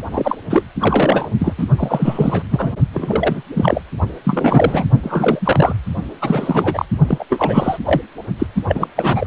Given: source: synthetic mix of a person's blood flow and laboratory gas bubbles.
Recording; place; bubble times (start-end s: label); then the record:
Doppler ultrasound of blood flow; precordium
0.11-0.37 s: bubbles
0.49-0.63 s: bubbles
0.79-1.31 s: bubbles
1.39-1.53 s: bubbles
1.57-1.65 s: bubbles
1.76-2.43 s: bubbles
2.50-2.73 s: bubbles
2.93-3.42 s: bubbles
3.54-3.81 s: bubbles
4.25-4.85 s: bubbles
5.02-5.75 s: bubbles
6.21-6.85 s: bubbles
7.07-7.25 s: bubbles
7.29-7.78 s: bubbles
7.85-8.02 s: bubbles
8.38-8.46 s: bubbles
8.55-8.62 s: bubbles
8.67-8.88 s: bubbles
8.96-9.27 s: bubbles
From the record:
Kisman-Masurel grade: 343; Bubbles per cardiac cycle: rolling drumbeat, 9 or more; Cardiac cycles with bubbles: 100%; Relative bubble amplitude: loud (0.450 to 0.775); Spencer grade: 3 (all of the cardiac periods contain showers or single bubble signals, but not dominating or overriding the cardiac motion signals); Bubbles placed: only in the low amplitude regions of the cardiac cycle